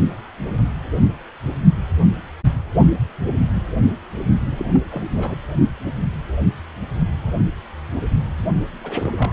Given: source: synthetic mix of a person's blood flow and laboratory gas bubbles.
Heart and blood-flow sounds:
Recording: Doppler ultrasound of blood flow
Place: precordium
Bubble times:
4.46-4.78 s: bubbles
4.91-5.03 s: bubbles
5.16-5.36 s: bubbles
8.42-8.66 s: bubbles
8.83-9.12 s: bubbles
9.18-9.32 s: bubbles
From the record:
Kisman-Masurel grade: 221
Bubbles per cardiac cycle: several, 3 to 8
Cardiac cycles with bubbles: 10 to 50%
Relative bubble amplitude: barely perceptible (0.100 to 0.250)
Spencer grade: 2 (many but less than half of the cardiac periods contain bubble signals, singularly or in groups)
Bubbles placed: only in the low amplitude regions of the cardiac cycle

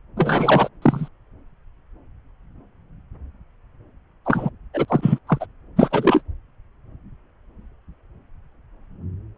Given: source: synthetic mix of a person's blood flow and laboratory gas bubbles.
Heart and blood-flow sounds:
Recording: Doppler ultrasound of blood flow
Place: subclavian vein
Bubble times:
0.16-0.69 s: bubbles
0.81-1.08 s: bubbles
4.25-4.50 s: bubbles
4.74-4.85 s: bubbles
4.88-5.19 s: bubbles
5.27-5.46 s: bubbles
5.76-6.21 s: bubbles
From the record:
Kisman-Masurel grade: 223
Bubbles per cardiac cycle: several, 3 to 8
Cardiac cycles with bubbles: 10 to 50%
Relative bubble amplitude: loud (0.450 to 0.775)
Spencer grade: 2 (many but less than half of the cardiac periods contain bubble signals, singularly or in groups)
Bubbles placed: anywhere in the cardiac cycle

